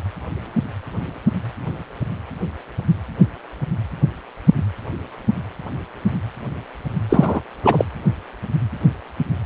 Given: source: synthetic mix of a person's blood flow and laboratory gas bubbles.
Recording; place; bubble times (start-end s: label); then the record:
Doppler ultrasound of blood flow; precordium
7.09-7.41 s: bubbles
7.62-7.85 s: bubbles
From the record:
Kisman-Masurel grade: 223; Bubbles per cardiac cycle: several, 3 to 8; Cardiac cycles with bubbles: 10 to 50%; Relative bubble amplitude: loud (0.450 to 0.775); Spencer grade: 2 (many but less than half of the cardiac periods contain bubble signals, singularly or in groups); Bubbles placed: anywhere in the cardiac cycle